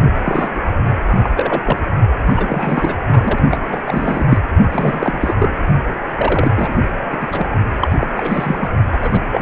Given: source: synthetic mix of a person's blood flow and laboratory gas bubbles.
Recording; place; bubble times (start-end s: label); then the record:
Doppler ultrasound of blood flow; precordium
0.24-0.72 s: bubbles
1.07-1.19 s: bubbles
1.24-1.29 s: bubbles
1.36-1.60 s: bubbles
1.64-1.79 s: bubbles
2.15-3.04 s: bubbles
3.12-3.39 s: bubbles
3.50-3.81 s: bubbles
3.86-4.25 s: bubbles
4.27-4.39 s: bubbles
4.70-5.35 s: bubbles
5.38-5.49 s: bubbles
6.17-6.51 s: bubbles
6.55-6.74 s: bubbles
7.11-7.16 s: bubbles
7.20-7.27 s: bubbles
7.31-7.47 s: bubbles
7.80-7.92 s: bubbles
8.00-8.07 s: bubbles
8.16-8.68 s: bubbles
8.92-8.97 s: bubbles
9.01-9.25 s: bubbles
9.31-9.42 s: bubbles
From the record:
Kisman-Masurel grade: 342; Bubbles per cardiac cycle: rolling drumbeat, 9 or more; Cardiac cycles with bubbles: 100%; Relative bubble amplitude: moderate (0.250 to 0.450); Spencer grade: 3 (all of the cardiac periods contain showers or single bubble signals, but not dominating or overriding the cardiac motion signals); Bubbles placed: only in the low amplitude regions of the cardiac cycle